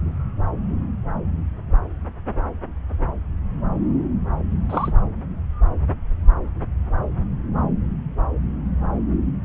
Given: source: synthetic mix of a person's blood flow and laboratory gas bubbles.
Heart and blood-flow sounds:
Doppler ultrasound of blood flow; subclavian vein
4.70-4.91 s: bubbles
From the record:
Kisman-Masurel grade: 112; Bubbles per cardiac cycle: 1 to 2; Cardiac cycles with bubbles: 1 to 10%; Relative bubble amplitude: moderate (0.250 to 0.450); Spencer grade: 1 (occasional bubble signal discernible with the cardiac motion signal, with majority of cardiac periods free of bubbles); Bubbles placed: anywhere in the cardiac cycle

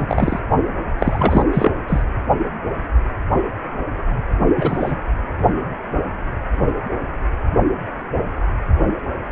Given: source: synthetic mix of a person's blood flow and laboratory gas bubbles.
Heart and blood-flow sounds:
Doppler ultrasound of blood flow; precordium
0.00-0.40 s: bubbles
0.98-1.46 s: bubbles
1.52-1.71 s: bubbles
1.87-2.04 s: bubbles
4.56-4.98 s: bubbles
From the record:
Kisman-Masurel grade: 223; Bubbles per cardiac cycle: several, 3 to 8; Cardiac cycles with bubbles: 10 to 50%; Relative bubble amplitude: loud (0.450 to 0.775); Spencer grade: 2 (many but less than half of the cardiac periods contain bubble signals, singularly or in groups); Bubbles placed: only in the low amplitude regions of the cardiac cycle

